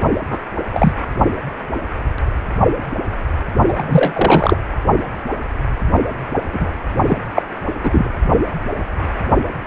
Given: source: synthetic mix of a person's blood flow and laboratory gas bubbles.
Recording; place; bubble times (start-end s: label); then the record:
Doppler ultrasound of blood flow; precordium
0.30-0.39 s: bubbles
0.71-0.93 s: bubbles
3.68-4.58 s: bubbles
6.52-6.71 s: bubbles
7.06-7.17 s: bubbles
7.34-7.42 s: bubbles
7.83-8.08 s: bubbles
From the record:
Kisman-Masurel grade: 223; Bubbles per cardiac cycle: several, 3 to 8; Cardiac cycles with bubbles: 10 to 50%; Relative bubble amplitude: loud (0.450 to 0.775); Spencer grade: 2 (many but less than half of the cardiac periods contain bubble signals, singularly or in groups); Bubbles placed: only in the low amplitude regions of the cardiac cycle